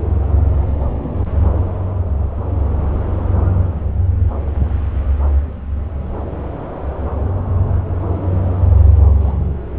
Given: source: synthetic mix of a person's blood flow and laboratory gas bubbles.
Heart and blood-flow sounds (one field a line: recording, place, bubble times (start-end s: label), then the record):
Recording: Doppler ultrasound of blood flow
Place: subclavian vein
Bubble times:
8.88-9.34 s: bubbles
From the record:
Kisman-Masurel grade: 111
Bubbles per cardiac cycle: 1 to 2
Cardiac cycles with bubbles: 1 to 10%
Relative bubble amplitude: barely perceptible (0.100 to 0.250)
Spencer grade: 1 (occasional bubble signal discernible with the cardiac motion signal, with majority of cardiac periods free of bubbles)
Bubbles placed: anywhere in the cardiac cycle